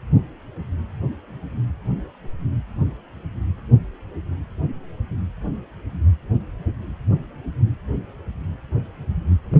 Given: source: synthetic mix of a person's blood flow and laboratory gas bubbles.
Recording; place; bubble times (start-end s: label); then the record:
Doppler ultrasound of blood flow; precordium
9.51-9.60 s: bubbles
From the record:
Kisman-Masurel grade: 211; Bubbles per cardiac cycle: several, 3 to 8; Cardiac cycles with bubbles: 1 to 10%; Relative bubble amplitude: barely perceptible (0.100 to 0.250); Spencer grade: 1 (occasional bubble signal discernible with the cardiac motion signal, with majority of cardiac periods free of bubbles); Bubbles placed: anywhere in the cardiac cycle